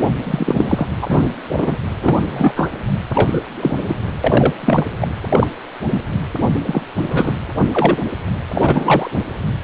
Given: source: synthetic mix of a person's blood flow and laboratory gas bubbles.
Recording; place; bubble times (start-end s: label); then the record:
Doppler ultrasound of blood flow; precordium
0.23-0.86 s: bubbles
1.01-1.26 s: bubbles
1.51-1.77 s: bubbles
2.00-2.53 s: bubbles
2.55-2.71 s: bubbles
3.15-3.42 s: bubbles
3.60-3.81 s: bubbles
3.88-3.95 s: bubbles
4.24-4.54 s: bubbles
4.60-4.86 s: bubbles
5.01-5.08 s: bubbles
5.29-5.48 s: bubbles
5.91-6.00 s: bubbles
6.66-6.82 s: bubbles
6.98-7.35 s: bubbles
7.73-7.97 s: bubbles
8.52-9.11 s: bubbles
From the record:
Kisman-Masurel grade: 243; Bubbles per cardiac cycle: several, 3 to 8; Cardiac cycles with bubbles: 100%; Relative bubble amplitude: loud (0.450 to 0.775); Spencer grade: 3 (all of the cardiac periods contain showers or single bubble signals, but not dominating or overriding the cardiac motion signals); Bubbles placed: anywhere in the cardiac cycle